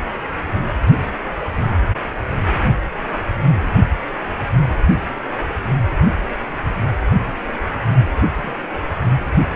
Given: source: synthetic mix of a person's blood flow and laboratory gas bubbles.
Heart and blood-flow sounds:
Doppler ultrasound of blood flow; precordium
8.36-8.51 s: bubbles
From the record:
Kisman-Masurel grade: 121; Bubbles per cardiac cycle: 1 to 2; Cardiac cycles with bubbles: 10 to 50%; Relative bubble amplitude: barely perceptible (0.100 to 0.250); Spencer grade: 2 (many but less than half of the cardiac periods contain bubble signals, singularly or in groups); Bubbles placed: only in the low amplitude regions of the cardiac cycle

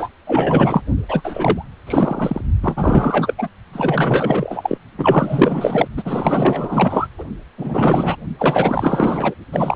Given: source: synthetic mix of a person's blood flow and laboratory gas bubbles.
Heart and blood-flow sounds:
Doppler ultrasound of blood flow; precordium
0.00-0.08 s: bubbles
0.27-0.83 s: bubbles
1.08-1.65 s: bubbles
1.86-2.41 s: bubbles
2.62-3.34 s: bubbles
3.38-3.49 s: bubbles
3.73-4.78 s: bubbles
4.97-5.88 s: bubbles
5.96-7.07 s: bubbles
7.17-7.25 s: bubbles
7.58-8.17 s: bubbles
8.38-9.35 s: bubbles
9.52-9.76 s: bubbles
From the record:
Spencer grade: 4 (maximum detectable bubble signal sounding continuously throughout systole and diastole of every cardiac period, and overriding the amplitude of the normal cardiac signals); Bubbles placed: only in the low amplitude regions of the cardiac cycle

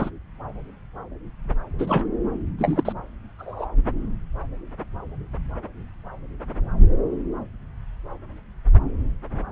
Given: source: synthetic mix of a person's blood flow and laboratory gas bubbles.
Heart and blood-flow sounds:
Doppler ultrasound of blood flow; subclavian vein
0.00-0.10 s: bubbles
1.79-2.06 s: bubbles
2.58-2.92 s: bubbles
3.39-3.67 s: bubbles
From the record:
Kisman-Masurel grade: 223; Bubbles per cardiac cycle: several, 3 to 8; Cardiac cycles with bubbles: 10 to 50%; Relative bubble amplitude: loud (0.450 to 0.775); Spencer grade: 2 (many but less than half of the cardiac periods contain bubble signals, singularly or in groups); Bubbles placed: anywhere in the cardiac cycle

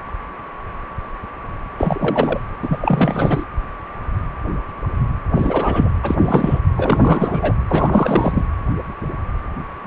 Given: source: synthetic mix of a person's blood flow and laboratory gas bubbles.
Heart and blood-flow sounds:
Doppler ultrasound of blood flow; precordium
1.77-2.40 s: bubbles
2.62-3.45 s: bubbles
5.35-5.89 s: bubbles
6.02-6.15 s: bubbles
6.20-6.60 s: bubbles
6.77-7.52 s: bubbles
7.67-8.45 s: bubbles
From the record:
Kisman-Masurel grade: 333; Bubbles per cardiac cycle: rolling drumbeat, 9 or more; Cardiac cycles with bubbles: 50 to 99%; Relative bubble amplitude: loud (0.450 to 0.775); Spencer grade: 3 (all of the cardiac periods contain showers or single bubble signals, but not dominating or overriding the cardiac motion signals); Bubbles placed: anywhere in the cardiac cycle

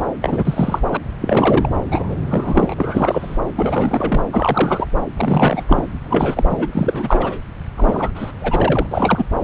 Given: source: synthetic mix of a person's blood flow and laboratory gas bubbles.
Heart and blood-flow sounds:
Doppler ultrasound of blood flow; subclavian vein
0.22-0.79 s: bubbles
0.92-0.97 s: bubbles
1.21-1.71 s: bubbles
1.90-2.15 s: bubbles
2.29-2.74 s: bubbles
2.77-3.37 s: bubbles
3.56-4.25 s: bubbles
4.33-4.86 s: bubbles
5.17-5.65 s: bubbles
5.67-5.87 s: bubbles
6.02-6.68 s: bubbles
6.71-7.41 s: bubbles
7.77-8.11 s: bubbles
8.14-8.32 s: bubbles
8.41-8.87 s: bubbles
8.91-9.24 s: bubbles
From the record:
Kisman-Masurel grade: 342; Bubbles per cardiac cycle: rolling drumbeat, 9 or more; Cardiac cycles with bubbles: 100%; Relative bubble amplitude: moderate (0.250 to 0.450); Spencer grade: 3 (all of the cardiac periods contain showers or single bubble signals, but not dominating or overriding the cardiac motion signals); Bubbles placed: anywhere in the cardiac cycle

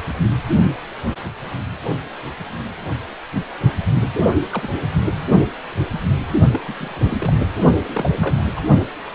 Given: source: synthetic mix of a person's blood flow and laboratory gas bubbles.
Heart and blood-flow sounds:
Doppler ultrasound of blood flow; precordium
4.51-4.69 s: bubbles
4.71-4.76 s: bubbles
6.51-6.60 s: bubbles
6.67-6.73 s: bubbles
6.79-7.33 s: bubbles
7.88-8.43 s: bubbles
8.55-8.61 s: bubbles
From the record:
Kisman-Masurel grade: 221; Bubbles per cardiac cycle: several, 3 to 8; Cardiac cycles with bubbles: 10 to 50%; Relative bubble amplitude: barely perceptible (0.100 to 0.250); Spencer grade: 2 (many but less than half of the cardiac periods contain bubble signals, singularly or in groups); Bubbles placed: only in the low amplitude regions of the cardiac cycle

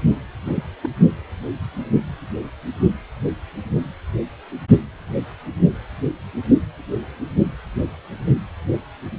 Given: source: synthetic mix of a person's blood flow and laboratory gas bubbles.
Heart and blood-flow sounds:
Doppler ultrasound of blood flow; precordium
0.45-0.63 s: bubbles
0.83-0.89 s: bubbles
From the record:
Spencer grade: 1 (occasional bubble signal discernible with the cardiac motion signal, with majority of cardiac periods free of bubbles); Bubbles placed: anywhere in the cardiac cycle

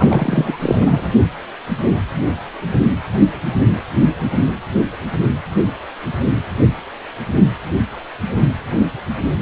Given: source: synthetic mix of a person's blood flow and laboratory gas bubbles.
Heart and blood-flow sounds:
Doppler ultrasound of blood flow; precordium
0.00-0.57 s: bubbles
0.60-0.79 s: bubbles
0.81-1.10 s: bubbles
From the record:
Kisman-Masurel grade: 213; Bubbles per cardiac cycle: several, 3 to 8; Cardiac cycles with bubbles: 1 to 10%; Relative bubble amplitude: loud (0.450 to 0.775); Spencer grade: 1 (occasional bubble signal discernible with the cardiac motion signal, with majority of cardiac periods free of bubbles); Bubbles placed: only in the low amplitude regions of the cardiac cycle

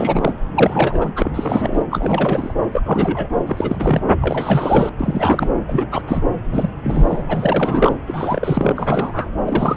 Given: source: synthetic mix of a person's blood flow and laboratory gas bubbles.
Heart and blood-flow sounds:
Doppler ultrasound of blood flow; subclavian vein
0.00-0.33 s: bubbles
0.54-1.11 s: bubbles
1.16-1.31 s: bubbles
1.34-1.84 s: bubbles
1.91-2.54 s: bubbles
2.71-2.82 s: bubbles
2.85-3.29 s: bubbles
3.46-4.05 s: bubbles
4.22-4.89 s: bubbles
5.00-5.50 s: bubbles
5.67-5.87 s: bubbles
5.91-6.02 s: bubbles
6.07-6.23 s: bubbles
6.51-6.70 s: bubbles
6.83-7.24 s: bubbles
7.29-7.96 s: bubbles
8.06-8.73 s: bubbles
8.76-9.30 s: bubbles
9.45-9.75 s: bubbles
From the record:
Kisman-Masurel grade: 343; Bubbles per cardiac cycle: rolling drumbeat, 9 or more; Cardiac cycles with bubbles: 100%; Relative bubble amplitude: loud (0.450 to 0.775); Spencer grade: 3 (all of the cardiac periods contain showers or single bubble signals, but not dominating or overriding the cardiac motion signals); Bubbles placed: anywhere in the cardiac cycle

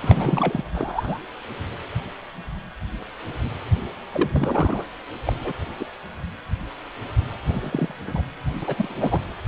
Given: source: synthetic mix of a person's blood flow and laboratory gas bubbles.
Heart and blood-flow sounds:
Doppler ultrasound of blood flow; precordium
0.01-0.64 s: bubbles
0.74-1.18 s: bubbles
4.10-4.84 s: bubbles
5.23-5.33 s: bubbles
5.44-5.52 s: bubbles
5.79-5.85 s: bubbles
7.45-7.93 s: bubbles
8.08-8.21 s: bubbles
8.62-9.21 s: bubbles
9.45-9.48 s: bubbles
From the record:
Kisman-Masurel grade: 232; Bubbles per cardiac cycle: several, 3 to 8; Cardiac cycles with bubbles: 50 to 99%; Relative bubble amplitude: moderate (0.250 to 0.450); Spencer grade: 3 (all of the cardiac periods contain showers or single bubble signals, but not dominating or overriding the cardiac motion signals); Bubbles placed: anywhere in the cardiac cycle

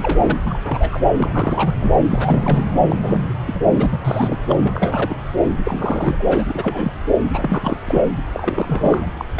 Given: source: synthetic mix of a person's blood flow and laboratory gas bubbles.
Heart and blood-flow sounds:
Doppler ultrasound of blood flow; subclavian vein
0.00-0.18 s: bubbles
0.27-0.39 s: bubbles
0.44-0.99 s: bubbles
1.17-1.75 s: bubbles
1.80-1.93 s: bubbles
2.09-2.66 s: bubbles
2.88-2.97 s: bubbles
3.03-3.22 s: bubbles
3.46-3.61 s: bubbles
3.71-4.00 s: bubbles
4.04-4.38 s: bubbles
4.48-4.54 s: bubbles
4.59-5.15 s: bubbles
5.63-6.22 s: bubbles
6.26-6.44 s: bubbles
6.47-6.92 s: bubbles
7.30-7.77 s: bubbles
7.84-8.02 s: bubbles
8.34-9.07 s: bubbles
9.19-9.25 s: bubbles
9.35-9.40 s: bubbles
From the record:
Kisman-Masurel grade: 342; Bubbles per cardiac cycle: rolling drumbeat, 9 or more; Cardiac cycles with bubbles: 100%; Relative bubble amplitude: moderate (0.250 to 0.450); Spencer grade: 3 (all of the cardiac periods contain showers or single bubble signals, but not dominating or overriding the cardiac motion signals); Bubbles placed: anywhere in the cardiac cycle

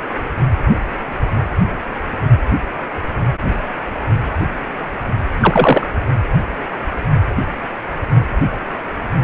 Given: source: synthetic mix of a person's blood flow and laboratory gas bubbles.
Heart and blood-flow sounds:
Doppler ultrasound of blood flow; precordium
5.40-5.87 s: bubbles
From the record:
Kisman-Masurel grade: 123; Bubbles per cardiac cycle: 1 to 2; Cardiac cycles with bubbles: 10 to 50%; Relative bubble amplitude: loud (0.450 to 0.775); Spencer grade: 2 (many but less than half of the cardiac periods contain bubble signals, singularly or in groups); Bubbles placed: anywhere in the cardiac cycle

